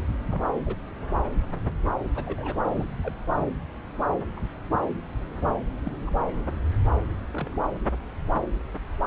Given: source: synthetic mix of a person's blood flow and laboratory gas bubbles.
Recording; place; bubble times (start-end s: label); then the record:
Doppler ultrasound of blood flow; subclavian vein
0.31-0.43 s: bubbles
0.66-0.76 s: bubbles
2.15-2.56 s: bubbles
2.73-2.87 s: bubbles
3.03-3.16 s: bubbles
3.39-3.46 s: bubbles
4.36-4.40 s: bubbles
5.84-5.91 s: bubbles
6.06-6.10 s: bubbles
7.32-7.63 s: bubbles
From the record:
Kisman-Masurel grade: 121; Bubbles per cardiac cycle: 1 to 2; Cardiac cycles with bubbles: 10 to 50%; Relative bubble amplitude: barely perceptible (0.100 to 0.250); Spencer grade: 2 (many but less than half of the cardiac periods contain bubble signals, singularly or in groups); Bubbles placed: anywhere in the cardiac cycle